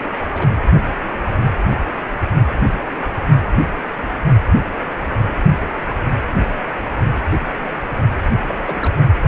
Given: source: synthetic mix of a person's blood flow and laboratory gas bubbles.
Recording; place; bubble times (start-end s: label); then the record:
Doppler ultrasound of blood flow; precordium
0.00-0.09 s: bubbles
0.32-0.47 s: bubbles
8.46-8.94 s: bubbles
From the record:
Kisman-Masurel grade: 221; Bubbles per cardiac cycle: several, 3 to 8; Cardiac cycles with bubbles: 10 to 50%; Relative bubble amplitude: barely perceptible (0.100 to 0.250); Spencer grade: 2 (many but less than half of the cardiac periods contain bubble signals, singularly or in groups); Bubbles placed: only in the low amplitude regions of the cardiac cycle